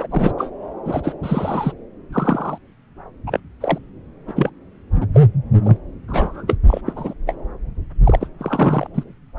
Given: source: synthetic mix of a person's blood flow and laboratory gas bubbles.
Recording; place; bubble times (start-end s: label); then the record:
Doppler ultrasound of blood flow; subclavian vein
0.00-0.07 s: bubbles
0.11-0.32 s: bubbles
0.38-0.49 s: bubbles
0.85-1.14 s: bubbles
1.23-1.72 s: bubbles
2.12-2.58 s: bubbles
3.26-3.40 s: bubbles
3.60-3.78 s: bubbles
4.28-4.50 s: bubbles
5.00-5.07 s: bubbles
5.14-5.20 s: bubbles
5.62-5.77 s: bubbles
6.08-6.43 s: bubbles
6.47-6.55 s: bubbles
6.67-6.81 s: bubbles
6.86-6.93 s: bubbles
6.96-7.14 s: bubbles
7.27-7.35 s: bubbles
8.04-8.27 s: bubbles
8.39-8.87 s: bubbles
8.94-9.04 s: bubbles
From the record:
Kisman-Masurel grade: 242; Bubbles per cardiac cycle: several, 3 to 8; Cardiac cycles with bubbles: 100%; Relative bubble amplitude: moderate (0.250 to 0.450); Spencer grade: 3 (all of the cardiac periods contain showers or single bubble signals, but not dominating or overriding the cardiac motion signals); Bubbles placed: anywhere in the cardiac cycle